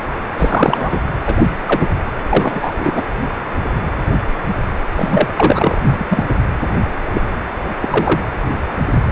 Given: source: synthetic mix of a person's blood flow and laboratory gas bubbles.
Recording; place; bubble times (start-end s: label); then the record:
Doppler ultrasound of blood flow; precordium
0.37-1.01 s: bubbles
1.26-1.35 s: bubbles
1.38-1.48 s: bubbles
1.67-1.89 s: bubbles
2.29-3.02 s: bubbles
4.96-5.27 s: bubbles
5.36-6.37 s: bubbles
7.14-7.21 s: bubbles
7.81-8.21 s: bubbles
From the record:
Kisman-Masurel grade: 233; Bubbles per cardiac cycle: several, 3 to 8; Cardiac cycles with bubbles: 50 to 99%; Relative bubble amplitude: loud (0.450 to 0.775); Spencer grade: 3 (all of the cardiac periods contain showers or single bubble signals, but not dominating or overriding the cardiac motion signals); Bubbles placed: anywhere in the cardiac cycle